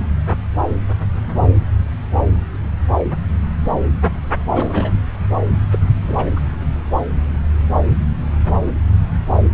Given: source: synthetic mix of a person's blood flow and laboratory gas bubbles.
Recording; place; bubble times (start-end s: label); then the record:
Doppler ultrasound of blood flow; subclavian vein
4.51-4.92 s: bubbles
5.71-5.79 s: bubbles
6.03-6.15 s: bubbles
6.17-6.30 s: bubbles
6.36-6.40 s: bubbles
From the record:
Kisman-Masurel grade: 222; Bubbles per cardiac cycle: several, 3 to 8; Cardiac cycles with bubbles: 10 to 50%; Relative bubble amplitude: moderate (0.250 to 0.450); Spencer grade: 2 (many but less than half of the cardiac periods contain bubble signals, singularly or in groups); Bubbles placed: anywhere in the cardiac cycle